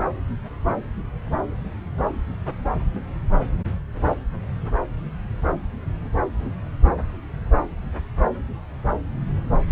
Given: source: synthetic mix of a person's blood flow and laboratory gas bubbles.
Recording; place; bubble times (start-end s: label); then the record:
Doppler ultrasound of blood flow; subclavian vein
no bubbles
From the record:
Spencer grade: 0 (complete lack of bubble signals)